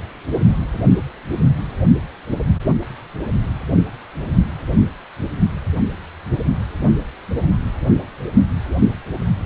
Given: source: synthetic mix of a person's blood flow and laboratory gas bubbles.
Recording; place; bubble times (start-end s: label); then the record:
Doppler ultrasound of blood flow; precordium
no bubbles
From the record:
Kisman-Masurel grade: 000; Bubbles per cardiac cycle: 0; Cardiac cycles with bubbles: 0%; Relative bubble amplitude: no bubbles discernible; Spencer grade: 0 (complete lack of bubble signals)